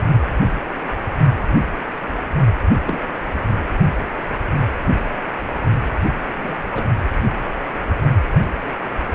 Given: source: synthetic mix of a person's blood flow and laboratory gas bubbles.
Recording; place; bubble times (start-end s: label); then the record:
Doppler ultrasound of blood flow; precordium
2.85-3.02 s: bubbles
6.37-6.67 s: bubbles
6.71-6.85 s: bubbles
From the record:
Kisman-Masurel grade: 122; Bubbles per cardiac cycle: 1 to 2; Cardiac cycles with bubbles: 10 to 50%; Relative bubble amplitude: moderate (0.250 to 0.450); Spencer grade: 2 (many but less than half of the cardiac periods contain bubble signals, singularly or in groups); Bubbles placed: anywhere in the cardiac cycle